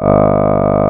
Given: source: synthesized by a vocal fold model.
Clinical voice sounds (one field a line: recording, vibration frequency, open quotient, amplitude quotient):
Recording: sustained vowel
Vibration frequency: 50 Hz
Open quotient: 0.2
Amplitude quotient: 1.1